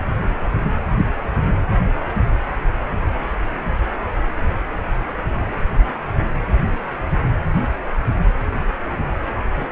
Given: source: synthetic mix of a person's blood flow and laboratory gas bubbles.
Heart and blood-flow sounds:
Doppler ultrasound of blood flow; precordium
9.53-9.70 s: bubbles
From the record:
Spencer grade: 1 (occasional bubble signal discernible with the cardiac motion signal, with majority of cardiac periods free of bubbles); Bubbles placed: anywhere in the cardiac cycle

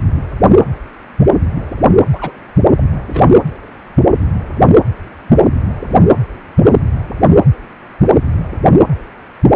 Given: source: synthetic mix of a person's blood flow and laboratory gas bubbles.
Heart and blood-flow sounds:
Doppler ultrasound of blood flow; precordium
2.12-2.32 s: bubbles
2.78-2.80 s: bubbles
3.09-3.32 s: bubbles
From the record:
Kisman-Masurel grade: 123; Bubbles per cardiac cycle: 1 to 2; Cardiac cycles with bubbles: 10 to 50%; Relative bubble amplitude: loud (0.450 to 0.775); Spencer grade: 2 (many but less than half of the cardiac periods contain bubble signals, singularly or in groups); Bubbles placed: anywhere in the cardiac cycle

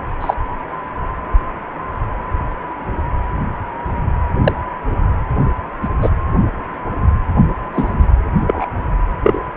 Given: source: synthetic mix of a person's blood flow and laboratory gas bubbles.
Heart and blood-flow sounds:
Doppler ultrasound of blood flow; precordium
0.20-0.34 s: bubbles
4.44-4.52 s: bubbles
5.82-5.88 s: bubbles
6.02-6.09 s: bubbles
7.73-7.96 s: bubbles
8.46-8.65 s: bubbles
9.22-9.43 s: bubbles
From the record:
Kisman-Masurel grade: 123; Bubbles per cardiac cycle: 1 to 2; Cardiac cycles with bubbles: 10 to 50%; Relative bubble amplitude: loud (0.450 to 0.775); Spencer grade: 2 (many but less than half of the cardiac periods contain bubble signals, singularly or in groups); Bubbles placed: anywhere in the cardiac cycle

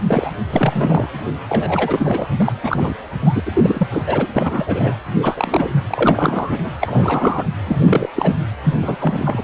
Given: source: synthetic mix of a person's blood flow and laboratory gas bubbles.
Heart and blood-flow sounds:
Doppler ultrasound of blood flow; precordium
0.07-0.30 s: bubbles
0.50-1.09 s: bubbles
1.48-2.28 s: bubbles
2.40-2.52 s: bubbles
2.63-2.94 s: bubbles
3.21-3.42 s: bubbles
3.46-3.88 s: bubbles
3.91-4.26 s: bubbles
4.36-4.96 s: bubbles
5.22-5.75 s: bubbles
5.87-6.71 s: bubbles
6.80-7.46 s: bubbles
7.67-8.10 s: bubbles
8.16-8.36 s: bubbles
8.64-8.76 s: bubbles
8.82-8.97 s: bubbles
8.99-9.41 s: bubbles
From the record:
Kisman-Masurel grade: 342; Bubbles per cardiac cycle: rolling drumbeat, 9 or more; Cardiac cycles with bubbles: 100%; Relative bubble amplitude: moderate (0.250 to 0.450); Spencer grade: 3 (all of the cardiac periods contain showers or single bubble signals, but not dominating or overriding the cardiac motion signals); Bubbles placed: anywhere in the cardiac cycle

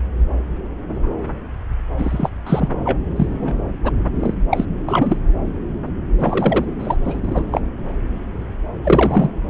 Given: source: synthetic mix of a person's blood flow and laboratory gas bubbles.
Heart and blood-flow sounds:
Doppler ultrasound of blood flow; subclavian vein
1.97-2.30 s: bubbles
2.46-2.68 s: bubbles
2.84-2.97 s: bubbles
3.16-3.55 s: bubbles
3.83-3.91 s: bubbles
4.20-4.34 s: bubbles
4.50-4.65 s: bubbles
4.86-5.17 s: bubbles
6.19-6.65 s: bubbles
6.79-6.96 s: bubbles
7.04-7.21 s: bubbles
7.23-7.45 s: bubbles
7.52-7.62 s: bubbles
8.84-9.31 s: bubbles
From the record:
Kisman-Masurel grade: 233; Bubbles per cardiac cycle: several, 3 to 8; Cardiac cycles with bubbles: 50 to 99%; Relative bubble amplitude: loud (0.450 to 0.775); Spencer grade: 3 (all of the cardiac periods contain showers or single bubble signals, but not dominating or overriding the cardiac motion signals); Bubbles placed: anywhere in the cardiac cycle

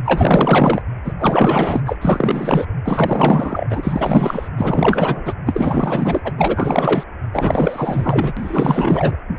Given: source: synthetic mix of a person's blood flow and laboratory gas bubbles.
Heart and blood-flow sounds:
Doppler ultrasound of blood flow; precordium
0.05-0.82 s: bubbles
1.04-1.13 s: bubbles
1.19-1.81 s: bubbles
1.85-1.96 s: bubbles
2.01-2.65 s: bubbles
2.84-3.68 s: bubbles
3.70-4.49 s: bubbles
4.56-5.33 s: bubbles
5.46-6.33 s: bubbles
6.38-7.04 s: bubbles
7.33-8.33 s: bubbles
8.37-9.16 s: bubbles
From the record:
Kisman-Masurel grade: 444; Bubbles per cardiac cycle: continuous sound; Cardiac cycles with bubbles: 100%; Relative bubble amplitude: maximal (0.775 to 0.999); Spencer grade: 4 (maximum detectable bubble signal sounding continuously throughout systole and diastole of every cardiac period, and overriding the amplitude of the normal cardiac signals); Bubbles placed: anywhere in the cardiac cycle

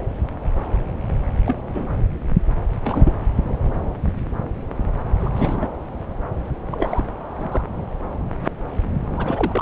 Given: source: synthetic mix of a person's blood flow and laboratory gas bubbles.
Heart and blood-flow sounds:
Doppler ultrasound of blood flow; subclavian vein
1.46-1.55 s: bubbles
1.68-1.86 s: bubbles
2.84-3.12 s: bubbles
5.19-5.30 s: bubbles
5.36-5.68 s: bubbles
6.70-7.08 s: bubbles
7.37-7.67 s: bubbles
9.04-9.62 s: bubbles
From the record:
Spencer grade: 2 (many but less than half of the cardiac periods contain bubble signals, singularly or in groups); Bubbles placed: anywhere in the cardiac cycle

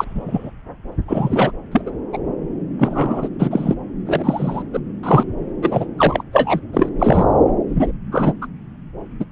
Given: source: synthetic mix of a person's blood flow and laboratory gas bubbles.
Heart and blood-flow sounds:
Doppler ultrasound of blood flow; subclavian vein
0.00-0.51 s: bubbles
1.07-1.52 s: bubbles
1.71-1.81 s: bubbles
1.86-1.92 s: bubbles
2.12-2.18 s: bubbles
2.79-3.29 s: bubbles
3.39-3.74 s: bubbles
4.06-4.62 s: bubbles
4.72-4.79 s: bubbles
5.03-5.24 s: bubbles
5.61-5.87 s: bubbles
5.98-6.23 s: bubbles
6.33-6.60 s: bubbles
6.73-6.89 s: bubbles
6.99-7.25 s: bubbles
7.68-7.91 s: bubbles
8.12-8.33 s: bubbles
8.41-8.46 s: bubbles
9.20-9.25 s: bubbles
From the record:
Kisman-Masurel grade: 233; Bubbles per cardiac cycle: several, 3 to 8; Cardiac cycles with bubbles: 50 to 99%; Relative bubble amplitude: loud (0.450 to 0.775); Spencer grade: 3 (all of the cardiac periods contain showers or single bubble signals, but not dominating or overriding the cardiac motion signals); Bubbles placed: anywhere in the cardiac cycle

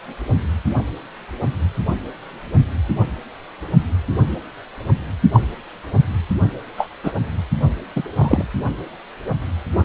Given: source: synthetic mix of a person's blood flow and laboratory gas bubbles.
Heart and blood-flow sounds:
Doppler ultrasound of blood flow; precordium
5.33-5.40 s: bubbles
6.77-6.88 s: bubbles
7.04-7.12 s: bubbles
7.96-8.03 s: bubbles
8.18-8.45 s: bubbles
From the record:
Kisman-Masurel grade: 123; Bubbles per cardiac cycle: 1 to 2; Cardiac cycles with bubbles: 10 to 50%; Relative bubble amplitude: loud (0.450 to 0.775); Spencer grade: 2 (many but less than half of the cardiac periods contain bubble signals, singularly or in groups); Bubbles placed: only in the low amplitude regions of the cardiac cycle

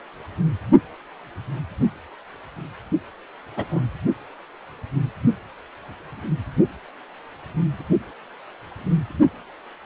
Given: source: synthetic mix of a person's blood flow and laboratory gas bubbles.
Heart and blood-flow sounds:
Doppler ultrasound of blood flow; precordium
3.56-3.65 s: bubbles
3.71-3.81 s: bubbles
From the record:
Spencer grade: 2 (many but less than half of the cardiac periods contain bubble signals, singularly or in groups); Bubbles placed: only in the low amplitude regions of the cardiac cycle

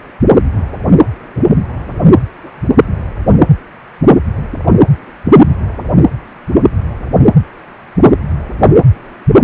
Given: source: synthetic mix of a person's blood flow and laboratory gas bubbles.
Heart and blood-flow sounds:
Doppler ultrasound of blood flow; precordium
2.42-2.63 s: bubbles
From the record:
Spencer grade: 1 (occasional bubble signal discernible with the cardiac motion signal, with majority of cardiac periods free of bubbles); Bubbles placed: anywhere in the cardiac cycle

